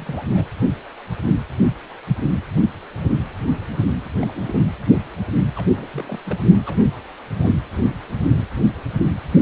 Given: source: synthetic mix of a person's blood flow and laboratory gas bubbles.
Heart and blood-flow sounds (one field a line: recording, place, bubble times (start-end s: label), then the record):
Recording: Doppler ultrasound of blood flow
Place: precordium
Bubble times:
0.00-0.24 s: bubbles
0.34-0.45 s: bubbles
4.02-4.09 s: bubbles
4.22-4.32 s: bubbles
4.34-4.58 s: bubbles
5.55-5.66 s: bubbles
5.69-5.87 s: bubbles
5.91-6.20 s: bubbles
6.25-6.38 s: bubbles
6.66-6.88 s: bubbles
7.41-7.53 s: bubbles
From the record:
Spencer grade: 2 (many but less than half of the cardiac periods contain bubble signals, singularly or in groups)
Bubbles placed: anywhere in the cardiac cycle